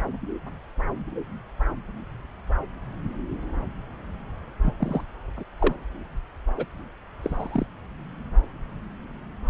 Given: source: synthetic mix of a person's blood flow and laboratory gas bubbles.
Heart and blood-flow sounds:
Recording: Doppler ultrasound of blood flow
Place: subclavian vein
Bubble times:
4.62-4.74 s: bubbles
4.78-5.02 s: bubbles
5.36-5.43 s: bubbles
5.59-5.75 s: bubbles
6.57-6.65 s: bubbles
7.20-7.65 s: bubbles
From the record:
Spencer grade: 2 (many but less than half of the cardiac periods contain bubble signals, singularly or in groups)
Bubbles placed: anywhere in the cardiac cycle

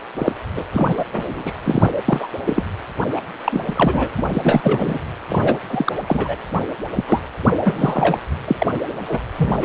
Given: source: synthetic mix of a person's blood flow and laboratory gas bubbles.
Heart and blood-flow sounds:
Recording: Doppler ultrasound of blood flow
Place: precordium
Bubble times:
0.18-0.32 s: bubbles
0.55-0.65 s: bubbles
0.72-1.04 s: bubbles
1.11-1.53 s: bubbles
1.62-1.91 s: bubbles
2.08-2.27 s: bubbles
2.46-2.63 s: bubbles
3.16-3.22 s: bubbles
3.45-4.10 s: bubbles
4.18-4.23 s: bubbles
4.34-4.61 s: bubbles
4.63-4.99 s: bubbles
5.29-5.58 s: bubbles
5.70-5.93 s: bubbles
6.08-6.36 s: bubbles
6.94-7.04 s: bubbles
7.07-7.20 s: bubbles
7.61-8.19 s: bubbles
8.47-8.55 s: bubbles
8.59-8.67 s: bubbles
9.00-9.20 s: bubbles
9.37-9.65 s: bubbles
From the record:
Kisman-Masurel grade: 343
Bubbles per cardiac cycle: rolling drumbeat, 9 or more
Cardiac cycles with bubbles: 100%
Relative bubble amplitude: loud (0.450 to 0.775)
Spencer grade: 3 (all of the cardiac periods contain showers or single bubble signals, but not dominating or overriding the cardiac motion signals)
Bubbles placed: anywhere in the cardiac cycle

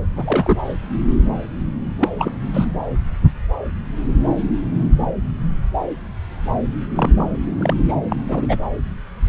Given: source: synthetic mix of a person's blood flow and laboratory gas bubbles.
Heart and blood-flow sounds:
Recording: Doppler ultrasound of blood flow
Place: subclavian vein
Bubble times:
0.12-0.57 s: bubbles
2.00-2.09 s: bubbles
2.18-2.32 s: bubbles
2.54-2.65 s: bubbles
6.96-7.27 s: bubbles
7.58-7.74 s: bubbles
7.88-7.95 s: bubbles
8.09-8.16 s: bubbles
8.29-8.57 s: bubbles
From the record:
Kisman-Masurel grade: 222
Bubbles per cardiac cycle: several, 3 to 8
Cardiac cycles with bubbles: 10 to 50%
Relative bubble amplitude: moderate (0.250 to 0.450)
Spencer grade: 2 (many but less than half of the cardiac periods contain bubble signals, singularly or in groups)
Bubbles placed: anywhere in the cardiac cycle

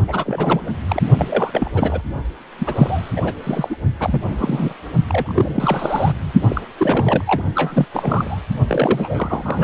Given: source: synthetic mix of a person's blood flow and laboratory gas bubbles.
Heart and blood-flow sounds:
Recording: Doppler ultrasound of blood flow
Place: precordium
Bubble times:
0.07-0.67 s: bubbles
0.88-1.02 s: bubbles
1.17-1.71 s: bubbles
1.74-2.02 s: bubbles
2.58-3.11 s: bubbles
3.16-3.21 s: bubbles
3.24-3.34 s: bubbles
3.44-3.76 s: bubbles
4.00-4.22 s: bubbles
4.28-4.73 s: bubbles
5.08-6.33 s: bubbles
6.40-6.61 s: bubbles
6.77-7.23 s: bubbles
7.26-7.43 s: bubbles
7.55-7.86 s: bubbles
7.93-8.41 s: bubbles
8.68-9.63 s: bubbles
From the record:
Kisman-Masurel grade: 342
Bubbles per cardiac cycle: rolling drumbeat, 9 or more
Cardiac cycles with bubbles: 100%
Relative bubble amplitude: moderate (0.250 to 0.450)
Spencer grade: 3 (all of the cardiac periods contain showers or single bubble signals, but not dominating or overriding the cardiac motion signals)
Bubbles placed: only in the low amplitude regions of the cardiac cycle

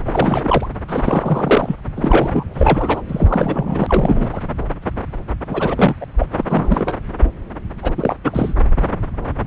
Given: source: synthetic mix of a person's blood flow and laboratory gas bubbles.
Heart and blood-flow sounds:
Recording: Doppler ultrasound of blood flow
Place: subclavian vein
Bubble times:
0.04-0.66 s: bubbles
0.88-1.76 s: bubbles
1.96-3.02 s: bubbles
3.09-4.30 s: bubbles
4.33-4.41 s: bubbles
5.49-5.96 s: bubbles
6.00-6.05 s: bubbles
6.19-6.26 s: bubbles
6.32-6.45 s: bubbles
6.49-6.94 s: bubbles
7.82-7.94 s: bubbles
7.96-8.16 s: bubbles
8.23-8.54 s: bubbles
From the record:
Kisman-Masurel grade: 332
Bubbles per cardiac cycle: rolling drumbeat, 9 or more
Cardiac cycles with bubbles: 50 to 99%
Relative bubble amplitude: moderate (0.250 to 0.450)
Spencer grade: 3 (all of the cardiac periods contain showers or single bubble signals, but not dominating or overriding the cardiac motion signals)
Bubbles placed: anywhere in the cardiac cycle

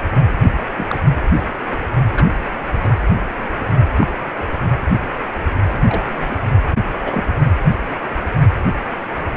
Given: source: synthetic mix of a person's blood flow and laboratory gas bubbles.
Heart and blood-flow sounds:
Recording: Doppler ultrasound of blood flow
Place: precordium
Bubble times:
0.77-0.96 s: bubbles
2.16-2.26 s: bubbles
2.82-2.89 s: bubbles
3.97-4.18 s: bubbles
5.88-6.02 s: bubbles
6.14-6.35 s: bubbles
7.05-7.22 s: bubbles
From the record:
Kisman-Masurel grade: 122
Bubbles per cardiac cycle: 1 to 2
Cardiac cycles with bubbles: 10 to 50%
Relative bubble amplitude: moderate (0.250 to 0.450)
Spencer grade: 2 (many but less than half of the cardiac periods contain bubble signals, singularly or in groups)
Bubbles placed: anywhere in the cardiac cycle

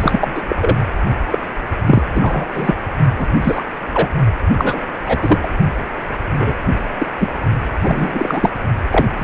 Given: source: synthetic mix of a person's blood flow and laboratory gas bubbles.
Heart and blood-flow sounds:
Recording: Doppler ultrasound of blood flow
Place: precordium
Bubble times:
0.01-0.42 s: bubbles
0.48-0.56 s: bubbles
0.60-0.78 s: bubbles
1.30-1.39 s: bubbles
1.86-2.03 s: bubbles
2.13-2.46 s: bubbles
2.53-2.75 s: bubbles
3.18-3.28 s: bubbles
3.42-3.64 s: bubbles
3.94-4.09 s: bubbles
4.58-4.81 s: bubbles
5.06-5.38 s: bubbles
5.43-5.49 s: bubbles
6.39-6.54 s: bubbles
6.99-7.07 s: bubbles
7.20-7.28 s: bubbles
7.82-8.49 s: bubbles
8.90-9.05 s: bubbles
9.17-9.23 s: bubbles
From the record:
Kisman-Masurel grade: 243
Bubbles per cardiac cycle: several, 3 to 8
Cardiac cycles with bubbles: 100%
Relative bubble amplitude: loud (0.450 to 0.775)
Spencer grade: 3 (all of the cardiac periods contain showers or single bubble signals, but not dominating or overriding the cardiac motion signals)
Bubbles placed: only in the low amplitude regions of the cardiac cycle

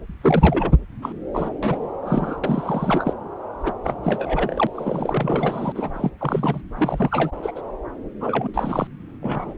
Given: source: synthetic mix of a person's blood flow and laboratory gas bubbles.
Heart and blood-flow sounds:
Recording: Doppler ultrasound of blood flow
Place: subclavian vein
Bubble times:
0.21-0.71 s: bubbles
1.02-1.12 s: bubbles
1.34-1.50 s: bubbles
1.62-1.98 s: bubbles
2.02-2.40 s: bubbles
2.44-3.14 s: bubbles
3.59-3.73 s: bubbles
3.84-3.94 s: bubbles
4.03-4.67 s: bubbles
4.75-5.72 s: bubbles
5.75-5.90 s: bubbles
5.95-6.10 s: bubbles
6.21-6.61 s: bubbles
6.76-7.32 s: bubbles
7.42-7.52 s: bubbles
7.55-7.61 s: bubbles
8.20-8.48 s: bubbles
8.54-8.87 s: bubbles
9.22-9.54 s: bubbles
From the record:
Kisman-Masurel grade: 342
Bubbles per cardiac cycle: rolling drumbeat, 9 or more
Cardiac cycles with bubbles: 100%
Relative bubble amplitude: moderate (0.250 to 0.450)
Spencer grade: 3 (all of the cardiac periods contain showers or single bubble signals, but not dominating or overriding the cardiac motion signals)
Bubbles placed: anywhere in the cardiac cycle

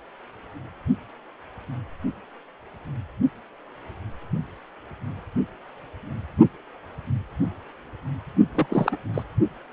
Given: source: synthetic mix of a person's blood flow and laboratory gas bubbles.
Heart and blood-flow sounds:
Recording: Doppler ultrasound of blood flow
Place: precordium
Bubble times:
8.54-8.67 s: bubbles
8.70-8.96 s: bubbles
9.14-9.23 s: bubbles
From the record:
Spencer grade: 1 (occasional bubble signal discernible with the cardiac motion signal, with majority of cardiac periods free of bubbles)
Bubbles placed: only in the low amplitude regions of the cardiac cycle

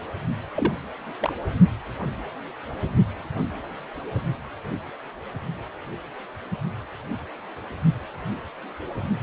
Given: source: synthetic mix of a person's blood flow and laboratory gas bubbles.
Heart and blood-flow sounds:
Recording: Doppler ultrasound of blood flow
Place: precordium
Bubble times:
0.55-0.74 s: bubbles
1.21-1.32 s: bubbles
From the record:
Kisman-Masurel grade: 121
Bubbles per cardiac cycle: 1 to 2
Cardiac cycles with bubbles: 10 to 50%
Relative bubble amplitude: barely perceptible (0.100 to 0.250)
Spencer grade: 2 (many but less than half of the cardiac periods contain bubble signals, singularly or in groups)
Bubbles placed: anywhere in the cardiac cycle

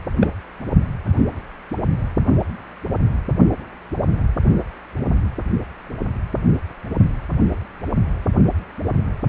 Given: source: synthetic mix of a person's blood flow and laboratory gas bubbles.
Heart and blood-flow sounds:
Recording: Doppler ultrasound of blood flow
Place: precordium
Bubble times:
0.20-0.29 s: bubbles
From the record:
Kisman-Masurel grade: 112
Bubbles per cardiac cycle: 1 to 2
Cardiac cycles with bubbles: 1 to 10%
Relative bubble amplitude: moderate (0.250 to 0.450)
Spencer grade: 1 (occasional bubble signal discernible with the cardiac motion signal, with majority of cardiac periods free of bubbles)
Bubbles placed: only in the low amplitude regions of the cardiac cycle

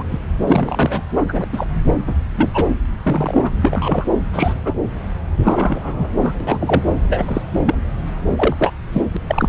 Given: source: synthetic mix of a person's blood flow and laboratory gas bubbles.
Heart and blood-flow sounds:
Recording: Doppler ultrasound of blood flow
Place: subclavian vein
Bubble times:
0.00-0.02 s: bubbles
0.11-0.20 s: bubbles
0.47-1.01 s: bubbles
1.15-1.47 s: bubbles
1.53-1.66 s: bubbles
2.06-2.15 s: bubbles
2.35-2.65 s: bubbles
3.03-3.51 s: bubbles
3.60-4.12 s: bubbles
4.33-4.53 s: bubbles
4.64-4.75 s: bubbles
5.42-6.10 s: bubbles
6.22-6.33 s: bubbles
6.40-6.83 s: bubbles
7.08-7.42 s: bubbles
7.65-7.75 s: bubbles
8.37-8.55 s: bubbles
8.59-8.73 s: bubbles
8.93-9.02 s: bubbles
9.13-9.17 s: bubbles
9.28-9.49 s: bubbles
From the record:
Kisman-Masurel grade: 243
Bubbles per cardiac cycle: several, 3 to 8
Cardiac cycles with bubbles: 100%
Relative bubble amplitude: loud (0.450 to 0.775)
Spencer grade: 3 (all of the cardiac periods contain showers or single bubble signals, but not dominating or overriding the cardiac motion signals)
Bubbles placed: anywhere in the cardiac cycle

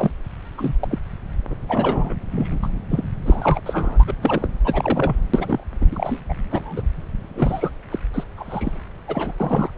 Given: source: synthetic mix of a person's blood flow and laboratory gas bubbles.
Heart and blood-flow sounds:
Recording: Doppler ultrasound of blood flow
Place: subclavian vein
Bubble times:
0.00-0.11 s: bubbles
0.58-0.72 s: bubbles
0.80-0.99 s: bubbles
1.50-1.55 s: bubbles
1.68-2.14 s: bubbles
2.31-2.59 s: bubbles
2.62-2.69 s: bubbles
2.90-3.04 s: bubbles
3.25-3.60 s: bubbles
3.65-4.14 s: bubbles
4.21-4.48 s: bubbles
4.64-5.16 s: bubbles
5.33-5.64 s: bubbles
5.81-5.86 s: bubbles
5.91-6.20 s: bubbles
6.29-6.33 s: bubbles
6.50-6.82 s: bubbles
7.35-7.70 s: bubbles
7.91-7.99 s: bubbles
8.14-8.23 s: bubbles
8.37-8.82 s: bubbles
9.08-9.31 s: bubbles
9.40-9.70 s: bubbles
From the record:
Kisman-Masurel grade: 242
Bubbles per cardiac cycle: several, 3 to 8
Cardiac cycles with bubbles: 100%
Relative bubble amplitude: moderate (0.250 to 0.450)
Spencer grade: 3 (all of the cardiac periods contain showers or single bubble signals, but not dominating or overriding the cardiac motion signals)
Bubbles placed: anywhere in the cardiac cycle

